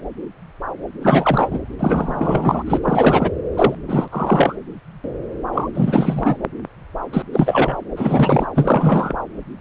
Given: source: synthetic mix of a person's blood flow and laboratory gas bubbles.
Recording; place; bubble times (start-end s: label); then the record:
Doppler ultrasound of blood flow; subclavian vein
1.01-1.59 s: bubbles
1.79-2.62 s: bubbles
2.66-2.79 s: bubbles
2.83-3.31 s: bubbles
3.56-3.75 s: bubbles
3.87-4.08 s: bubbles
4.11-4.55 s: bubbles
5.53-5.68 s: bubbles
5.75-6.38 s: bubbles
7.12-7.22 s: bubbles
7.32-7.77 s: bubbles
7.96-8.46 s: bubbles
8.54-9.16 s: bubbles
From the record:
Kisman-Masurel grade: 333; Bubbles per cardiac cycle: rolling drumbeat, 9 or more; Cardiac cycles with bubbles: 50 to 99%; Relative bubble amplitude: loud (0.450 to 0.775); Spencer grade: 3 (all of the cardiac periods contain showers or single bubble signals, but not dominating or overriding the cardiac motion signals); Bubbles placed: anywhere in the cardiac cycle